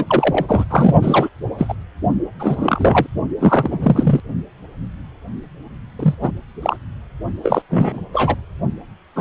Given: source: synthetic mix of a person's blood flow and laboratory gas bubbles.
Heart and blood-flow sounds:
Doppler ultrasound of blood flow; precordium
0.00-0.04 s: bubbles
0.07-0.65 s: bubbles
0.70-0.95 s: bubbles
1.02-1.29 s: bubbles
1.58-1.74 s: bubbles
2.39-3.07 s: bubbles
3.40-4.20 s: bubbles
5.99-6.15 s: bubbles
6.21-6.32 s: bubbles
6.62-6.77 s: bubbles
7.44-7.62 s: bubbles
7.70-8.01 s: bubbles
8.13-8.35 s: bubbles
9.15-9.21 s: bubbles
From the record:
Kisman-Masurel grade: 233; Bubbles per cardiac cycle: several, 3 to 8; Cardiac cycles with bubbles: 50 to 99%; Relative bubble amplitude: loud (0.450 to 0.775); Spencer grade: 3 (all of the cardiac periods contain showers or single bubble signals, but not dominating or overriding the cardiac motion signals); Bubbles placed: only in the low amplitude regions of the cardiac cycle

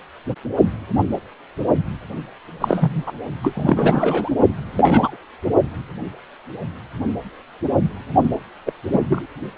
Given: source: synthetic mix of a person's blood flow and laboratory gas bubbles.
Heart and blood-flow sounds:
Doppler ultrasound of blood flow; precordium
2.60-3.04 s: bubbles
3.07-3.12 s: bubbles
3.43-4.29 s: bubbles
4.77-5.17 s: bubbles
8.66-8.72 s: bubbles
8.92-9.00 s: bubbles
9.06-9.26 s: bubbles
From the record:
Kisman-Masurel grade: 233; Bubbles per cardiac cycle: several, 3 to 8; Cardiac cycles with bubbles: 50 to 99%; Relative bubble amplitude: loud (0.450 to 0.775); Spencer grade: 3 (all of the cardiac periods contain showers or single bubble signals, but not dominating or overriding the cardiac motion signals); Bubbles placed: only in the low amplitude regions of the cardiac cycle

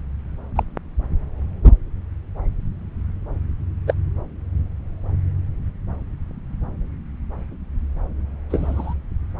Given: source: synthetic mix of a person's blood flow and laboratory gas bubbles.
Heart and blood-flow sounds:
Doppler ultrasound of blood flow; subclavian vein
0.56-0.63 s: bubbles
1.64-1.72 s: bubbles
3.87-3.94 s: bubbles
8.49-8.94 s: bubbles
From the record:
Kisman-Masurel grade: 123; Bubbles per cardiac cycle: 1 to 2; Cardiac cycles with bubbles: 10 to 50%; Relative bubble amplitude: loud (0.450 to 0.775); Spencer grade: 2 (many but less than half of the cardiac periods contain bubble signals, singularly or in groups); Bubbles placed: anywhere in the cardiac cycle

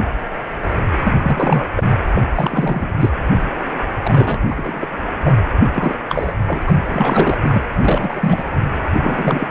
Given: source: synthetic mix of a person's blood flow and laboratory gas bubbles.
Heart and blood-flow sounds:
Doppler ultrasound of blood flow; precordium
1.04-1.12 s: bubbles
1.23-1.66 s: bubbles
1.76-1.92 s: bubbles
2.15-2.21 s: bubbles
2.35-2.92 s: bubbles
3.00-3.10 s: bubbles
4.03-4.41 s: bubbles
4.51-4.87 s: bubbles
5.25-5.33 s: bubbles
5.75-5.96 s: bubbles
6.08-6.34 s: bubbles
6.47-6.62 s: bubbles
6.67-6.74 s: bubbles
6.89-7.38 s: bubbles
7.43-7.62 s: bubbles
7.78-8.44 s: bubbles
9.00-9.47 s: bubbles
From the record:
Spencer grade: 3 (all of the cardiac periods contain showers or single bubble signals, but not dominating or overriding the cardiac motion signals); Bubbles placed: anywhere in the cardiac cycle

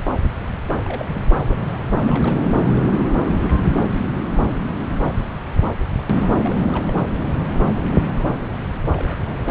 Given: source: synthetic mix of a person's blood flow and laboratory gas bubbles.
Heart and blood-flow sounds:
Doppler ultrasound of blood flow; subclavian vein
0.68-0.73 s: bubbles
0.84-1.29 s: bubbles
1.34-1.57 s: bubbles
1.83-1.90 s: bubbles
1.93-2.00 s: bubbles
2.02-2.61 s: bubbles
6.34-6.57 s: bubbles
6.69-6.85 s: bubbles
6.88-6.94 s: bubbles
6.96-7.03 s: bubbles
7.24-7.30 s: bubbles
8.97-9.43 s: bubbles
9.46-9.51 s: bubbles
From the record:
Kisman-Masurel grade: 221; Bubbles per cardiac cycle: several, 3 to 8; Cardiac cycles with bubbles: 10 to 50%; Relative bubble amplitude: barely perceptible (0.100 to 0.250); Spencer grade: 2 (many but less than half of the cardiac periods contain bubble signals, singularly or in groups); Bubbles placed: anywhere in the cardiac cycle

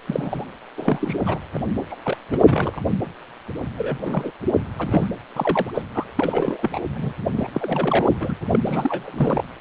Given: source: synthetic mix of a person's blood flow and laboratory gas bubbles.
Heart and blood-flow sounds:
Doppler ultrasound of blood flow; precordium
0.07-0.45 s: bubbles
0.77-1.17 s: bubbles
1.25-1.39 s: bubbles
1.54-1.59 s: bubbles
1.90-1.96 s: bubbles
2.04-2.17 s: bubbles
2.30-2.82 s: bubbles
3.77-4.32 s: bubbles
4.78-5.08 s: bubbles
5.36-5.71 s: bubbles
5.74-5.82 s: bubbles
5.95-6.05 s: bubbles
6.17-6.81 s: bubbles
6.94-7.14 s: bubbles
7.37-7.49 s: bubbles
7.53-8.08 s: bubbles
8.10-8.16 s: bubbles
8.20-8.36 s: bubbles
8.41-8.62 s: bubbles
8.66-9.43 s: bubbles
From the record:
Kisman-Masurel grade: 342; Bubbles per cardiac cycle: rolling drumbeat, 9 or more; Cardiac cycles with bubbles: 100%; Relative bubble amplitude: moderate (0.250 to 0.450); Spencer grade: 3 (all of the cardiac periods contain showers or single bubble signals, but not dominating or overriding the cardiac motion signals); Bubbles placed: anywhere in the cardiac cycle

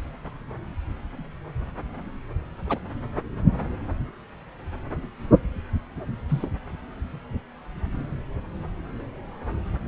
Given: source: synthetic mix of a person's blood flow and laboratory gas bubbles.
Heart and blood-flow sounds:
Doppler ultrasound of blood flow; subclavian vein
2.68-2.79 s: bubbles
6.29-6.50 s: bubbles
From the record:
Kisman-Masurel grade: 113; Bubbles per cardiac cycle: 1 to 2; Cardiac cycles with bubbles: 1 to 10%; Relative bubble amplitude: loud (0.450 to 0.775); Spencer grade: 1 (occasional bubble signal discernible with the cardiac motion signal, with majority of cardiac periods free of bubbles); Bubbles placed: anywhere in the cardiac cycle

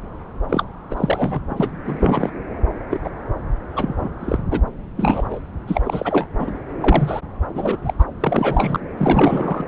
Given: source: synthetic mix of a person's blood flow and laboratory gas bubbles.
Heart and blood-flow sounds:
Doppler ultrasound of blood flow; subclavian vein
0.49-0.65 s: bubbles
0.90-1.40 s: bubbles
1.49-1.70 s: bubbles
1.85-2.31 s: bubbles
2.90-3.00 s: bubbles
3.04-3.10 s: bubbles
3.73-4.10 s: bubbles
4.21-4.37 s: bubbles
4.50-4.60 s: bubbles
4.97-5.40 s: bubbles
5.67-6.28 s: bubbles
6.39-6.53 s: bubbles
6.80-7.21 s: bubbles
7.54-7.77 s: bubbles
7.85-7.94 s: bubbles
7.99-8.05 s: bubbles
8.20-8.80 s: bubbles
8.97-9.65 s: bubbles
From the record:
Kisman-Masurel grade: 343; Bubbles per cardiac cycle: rolling drumbeat, 9 or more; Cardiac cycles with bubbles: 100%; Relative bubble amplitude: loud (0.450 to 0.775); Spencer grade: 3 (all of the cardiac periods contain showers or single bubble signals, but not dominating or overriding the cardiac motion signals); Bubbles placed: anywhere in the cardiac cycle

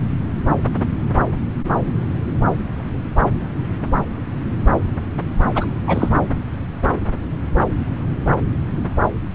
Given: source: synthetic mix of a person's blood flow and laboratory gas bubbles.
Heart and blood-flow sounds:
Doppler ultrasound of blood flow; subclavian vein
5.55-5.67 s: bubbles
5.87-6.09 s: bubbles
From the record:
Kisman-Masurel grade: 223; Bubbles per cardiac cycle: several, 3 to 8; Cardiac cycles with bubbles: 10 to 50%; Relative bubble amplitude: loud (0.450 to 0.775); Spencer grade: 2 (many but less than half of the cardiac periods contain bubble signals, singularly or in groups); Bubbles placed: anywhere in the cardiac cycle

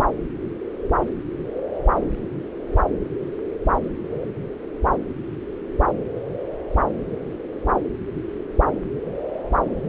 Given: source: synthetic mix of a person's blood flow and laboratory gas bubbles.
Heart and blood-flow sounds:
Doppler ultrasound of blood flow; subclavian vein
no bubbles
From the record:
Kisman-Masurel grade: 000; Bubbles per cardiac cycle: 0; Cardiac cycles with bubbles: 0%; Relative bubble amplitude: no bubbles discernible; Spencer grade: 0 (complete lack of bubble signals)

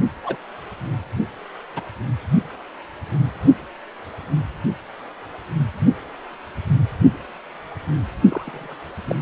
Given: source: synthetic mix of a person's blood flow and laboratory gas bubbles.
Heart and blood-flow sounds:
Doppler ultrasound of blood flow; precordium
0.23-0.36 s: bubbles
1.75-1.82 s: bubbles
8.29-8.75 s: bubbles
9.07-9.15 s: bubbles
From the record:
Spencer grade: 2 (many but less than half of the cardiac periods contain bubble signals, singularly or in groups); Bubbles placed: only in the low amplitude regions of the cardiac cycle

